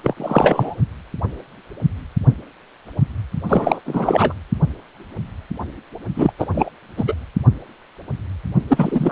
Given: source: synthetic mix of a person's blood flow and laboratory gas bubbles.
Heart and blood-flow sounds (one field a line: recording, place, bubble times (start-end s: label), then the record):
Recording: Doppler ultrasound of blood flow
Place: precordium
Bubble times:
0.03-0.76 s: bubbles
3.48-3.80 s: bubbles
3.85-4.33 s: bubbles
6.15-6.32 s: bubbles
6.38-6.46 s: bubbles
6.54-6.71 s: bubbles
6.97-7.14 s: bubbles
8.67-9.12 s: bubbles
From the record:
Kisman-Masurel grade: 333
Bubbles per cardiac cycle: rolling drumbeat, 9 or more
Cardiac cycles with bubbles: 50 to 99%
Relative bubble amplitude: loud (0.450 to 0.775)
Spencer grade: 3 (all of the cardiac periods contain showers or single bubble signals, but not dominating or overriding the cardiac motion signals)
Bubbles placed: only in the low amplitude regions of the cardiac cycle